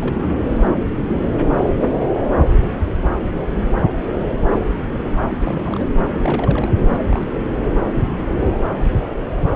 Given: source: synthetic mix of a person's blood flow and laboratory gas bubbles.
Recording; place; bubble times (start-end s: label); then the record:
Doppler ultrasound of blood flow; subclavian vein
0.00-0.15 s: bubbles
0.18-0.38 s: bubbles
5.31-5.86 s: bubbles
6.15-6.71 s: bubbles
6.92-6.98 s: bubbles
7.08-7.28 s: bubbles
7.52-7.58 s: bubbles
From the record:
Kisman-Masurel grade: 221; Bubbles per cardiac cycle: several, 3 to 8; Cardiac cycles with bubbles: 10 to 50%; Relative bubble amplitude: barely perceptible (0.100 to 0.250); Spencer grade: 2 (many but less than half of the cardiac periods contain bubble signals, singularly or in groups); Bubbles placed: anywhere in the cardiac cycle